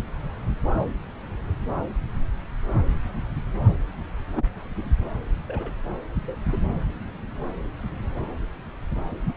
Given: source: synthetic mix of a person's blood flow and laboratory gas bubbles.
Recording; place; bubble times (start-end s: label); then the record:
Doppler ultrasound of blood flow; subclavian vein
4.37-4.45 s: bubbles
4.76-4.83 s: bubbles
5.48-5.74 s: bubbles
6.23-6.35 s: bubbles
6.51-6.58 s: bubbles
9.28-9.32 s: bubbles
From the record:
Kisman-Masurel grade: 121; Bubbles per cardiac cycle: 1 to 2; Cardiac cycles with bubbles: 10 to 50%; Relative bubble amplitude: barely perceptible (0.100 to 0.250); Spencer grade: 2 (many but less than half of the cardiac periods contain bubble signals, singularly or in groups); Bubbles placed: anywhere in the cardiac cycle